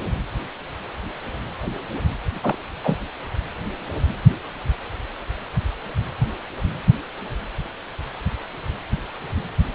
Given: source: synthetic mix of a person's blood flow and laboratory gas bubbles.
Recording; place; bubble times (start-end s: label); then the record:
Doppler ultrasound of blood flow; precordium
2.40-2.58 s: bubbles
2.82-2.98 s: bubbles
From the record:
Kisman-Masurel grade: 122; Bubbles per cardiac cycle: 1 to 2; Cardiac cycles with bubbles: 10 to 50%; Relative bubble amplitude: moderate (0.250 to 0.450); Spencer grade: 2 (many but less than half of the cardiac periods contain bubble signals, singularly or in groups); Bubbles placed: anywhere in the cardiac cycle